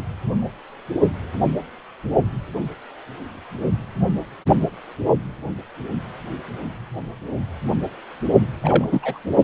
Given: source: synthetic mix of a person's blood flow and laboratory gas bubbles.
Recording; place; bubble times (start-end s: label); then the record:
Doppler ultrasound of blood flow; precordium
8.60-9.18 s: bubbles
From the record:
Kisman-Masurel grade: 222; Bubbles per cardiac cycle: several, 3 to 8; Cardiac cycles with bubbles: 10 to 50%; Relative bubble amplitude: moderate (0.250 to 0.450); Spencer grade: 2 (many but less than half of the cardiac periods contain bubble signals, singularly or in groups); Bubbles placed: only in the low amplitude regions of the cardiac cycle